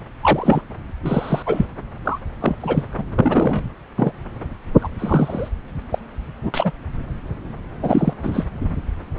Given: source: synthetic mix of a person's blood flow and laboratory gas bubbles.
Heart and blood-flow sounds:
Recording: Doppler ultrasound of blood flow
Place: subclavian vein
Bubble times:
0.21-0.61 s: bubbles
1.02-1.43 s: bubbles
1.46-1.66 s: bubbles
2.04-2.19 s: bubbles
2.40-2.55 s: bubbles
2.60-2.85 s: bubbles
2.97-3.04 s: bubbles
3.15-3.67 s: bubbles
3.98-4.12 s: bubbles
4.80-4.88 s: bubbles
4.98-5.48 s: bubbles
5.91-5.98 s: bubbles
6.42-6.71 s: bubbles
7.82-8.14 s: bubbles
8.23-8.46 s: bubbles
From the record:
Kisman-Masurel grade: 233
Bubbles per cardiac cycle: several, 3 to 8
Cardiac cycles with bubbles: 50 to 99%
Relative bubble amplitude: loud (0.450 to 0.775)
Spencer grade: 3 (all of the cardiac periods contain showers or single bubble signals, but not dominating or overriding the cardiac motion signals)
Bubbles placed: anywhere in the cardiac cycle

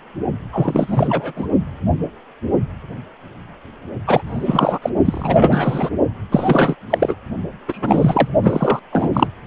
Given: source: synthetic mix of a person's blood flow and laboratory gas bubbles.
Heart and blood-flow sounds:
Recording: Doppler ultrasound of blood flow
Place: precordium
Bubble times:
0.53-1.33 s: bubbles
1.35-1.47 s: bubbles
4.07-4.22 s: bubbles
4.26-4.79 s: bubbles
4.82-4.90 s: bubbles
5.04-5.90 s: bubbles
6.31-6.75 s: bubbles
6.90-7.15 s: bubbles
7.68-8.28 s: bubbles
8.43-8.79 s: bubbles
8.92-9.10 s: bubbles
9.13-9.28 s: bubbles
From the record:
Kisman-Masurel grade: 333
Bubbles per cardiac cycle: rolling drumbeat, 9 or more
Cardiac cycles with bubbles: 50 to 99%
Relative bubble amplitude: loud (0.450 to 0.775)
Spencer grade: 3 (all of the cardiac periods contain showers or single bubble signals, but not dominating or overriding the cardiac motion signals)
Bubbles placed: only in the low amplitude regions of the cardiac cycle

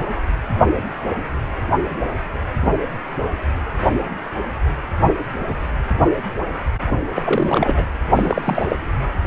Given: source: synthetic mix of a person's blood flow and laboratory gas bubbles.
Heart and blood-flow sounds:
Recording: Doppler ultrasound of blood flow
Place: precordium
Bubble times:
6.87-6.92 s: bubbles
7.16-7.21 s: bubbles
7.25-7.87 s: bubbles
8.12-8.76 s: bubbles
From the record:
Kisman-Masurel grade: 222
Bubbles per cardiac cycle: several, 3 to 8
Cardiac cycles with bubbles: 10 to 50%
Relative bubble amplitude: moderate (0.250 to 0.450)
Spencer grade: 2 (many but less than half of the cardiac periods contain bubble signals, singularly or in groups)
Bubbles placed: anywhere in the cardiac cycle

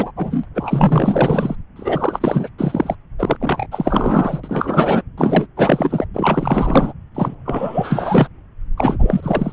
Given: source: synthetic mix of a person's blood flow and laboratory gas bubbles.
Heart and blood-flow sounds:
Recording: Doppler ultrasound of blood flow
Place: subclavian vein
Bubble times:
0.00-0.11 s: bubbles
0.16-0.46 s: bubbles
0.55-1.56 s: bubbles
1.76-2.49 s: bubbles
2.58-2.95 s: bubbles
3.19-3.36 s: bubbles
3.40-3.66 s: bubbles
3.71-4.40 s: bubbles
4.44-5.03 s: bubbles
5.18-5.47 s: bubbles
5.56-6.06 s: bubbles
6.14-6.93 s: bubbles
7.15-7.35 s: bubbles
7.45-8.28 s: bubbles
8.77-9.52 s: bubbles
From the record:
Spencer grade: 4 (maximum detectable bubble signal sounding continuously throughout systole and diastole of every cardiac period, and overriding the amplitude of the normal cardiac signals)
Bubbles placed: anywhere in the cardiac cycle

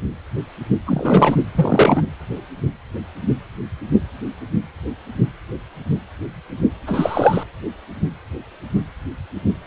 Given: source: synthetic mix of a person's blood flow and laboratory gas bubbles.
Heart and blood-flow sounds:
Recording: Doppler ultrasound of blood flow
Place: precordium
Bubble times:
0.85-1.36 s: bubbles
1.55-2.03 s: bubbles
6.87-7.43 s: bubbles
From the record:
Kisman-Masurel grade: 223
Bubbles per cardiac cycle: several, 3 to 8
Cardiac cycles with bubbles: 10 to 50%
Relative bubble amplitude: loud (0.450 to 0.775)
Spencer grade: 2 (many but less than half of the cardiac periods contain bubble signals, singularly or in groups)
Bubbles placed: anywhere in the cardiac cycle

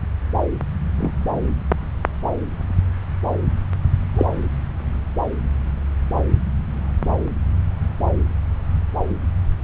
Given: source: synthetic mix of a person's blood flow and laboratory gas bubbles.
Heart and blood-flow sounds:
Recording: Doppler ultrasound of blood flow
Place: subclavian vein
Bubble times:
0.98-1.13 s: bubbles
4.15-4.25 s: bubbles
From the record:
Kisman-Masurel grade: 122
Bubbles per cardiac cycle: 1 to 2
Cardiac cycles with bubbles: 10 to 50%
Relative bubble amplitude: moderate (0.250 to 0.450)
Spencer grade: 2 (many but less than half of the cardiac periods contain bubble signals, singularly or in groups)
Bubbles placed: anywhere in the cardiac cycle

